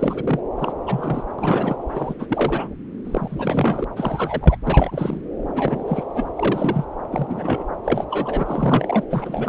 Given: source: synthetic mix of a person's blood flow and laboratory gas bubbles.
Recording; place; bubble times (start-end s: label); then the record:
Doppler ultrasound of blood flow; subclavian vein
0.00-0.40 s: bubbles
0.56-0.78 s: bubbles
0.86-1.22 s: bubbles
1.39-1.76 s: bubbles
1.93-2.14 s: bubbles
2.19-2.69 s: bubbles
3.05-3.85 s: bubbles
3.96-4.57 s: bubbles
4.65-5.18 s: bubbles
5.54-6.10 s: bubbles
6.13-6.30 s: bubbles
6.35-6.85 s: bubbles
7.11-7.64 s: bubbles
7.84-8.04 s: bubbles
8.10-9.04 s: bubbles
9.11-9.49 s: bubbles
From the record:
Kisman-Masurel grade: 342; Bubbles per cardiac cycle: rolling drumbeat, 9 or more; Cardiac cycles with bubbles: 100%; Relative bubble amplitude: moderate (0.250 to 0.450); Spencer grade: 3 (all of the cardiac periods contain showers or single bubble signals, but not dominating or overriding the cardiac motion signals); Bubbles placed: anywhere in the cardiac cycle